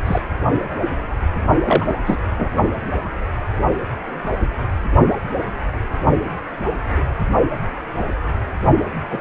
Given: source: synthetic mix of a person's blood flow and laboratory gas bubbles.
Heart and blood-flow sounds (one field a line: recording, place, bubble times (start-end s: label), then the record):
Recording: Doppler ultrasound of blood flow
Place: precordium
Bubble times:
0.00-0.20 s: bubbles
1.65-1.93 s: bubbles
2.04-2.17 s: bubbles
2.38-2.49 s: bubbles
9.09-9.21 s: bubbles
From the record:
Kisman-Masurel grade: 222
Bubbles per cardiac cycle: several, 3 to 8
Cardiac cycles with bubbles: 10 to 50%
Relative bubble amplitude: moderate (0.250 to 0.450)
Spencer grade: 2 (many but less than half of the cardiac periods contain bubble signals, singularly or in groups)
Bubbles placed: only in the low amplitude regions of the cardiac cycle